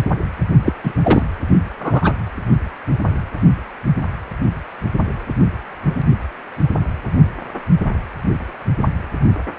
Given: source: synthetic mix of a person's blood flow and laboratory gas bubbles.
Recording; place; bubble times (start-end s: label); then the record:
Doppler ultrasound of blood flow; precordium
0.65-0.73 s: bubbles
0.83-0.94 s: bubbles
1.02-1.22 s: bubbles
1.80-2.13 s: bubbles
From the record:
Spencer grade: 1 (occasional bubble signal discernible with the cardiac motion signal, with majority of cardiac periods free of bubbles); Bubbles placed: only in the low amplitude regions of the cardiac cycle